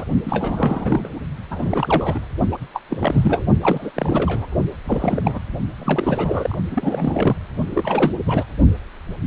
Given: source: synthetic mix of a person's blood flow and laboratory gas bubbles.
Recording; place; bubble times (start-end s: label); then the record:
Doppler ultrasound of blood flow; precordium
0.00-0.05 s: bubbles
0.24-1.09 s: bubbles
1.51-2.19 s: bubbles
2.52-2.58 s: bubbles
2.73-2.81 s: bubbles
2.90-3.46 s: bubbles
3.62-3.91 s: bubbles
3.96-4.46 s: bubbles
4.84-5.39 s: bubbles
5.78-6.58 s: bubbles
6.71-7.36 s: bubbles
7.74-8.11 s: bubbles
8.26-8.43 s: bubbles
From the record:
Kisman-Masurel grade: 332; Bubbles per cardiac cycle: rolling drumbeat, 9 or more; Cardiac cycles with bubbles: 50 to 99%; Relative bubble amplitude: moderate (0.250 to 0.450); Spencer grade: 3 (all of the cardiac periods contain showers or single bubble signals, but not dominating or overriding the cardiac motion signals); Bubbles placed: only in the low amplitude regions of the cardiac cycle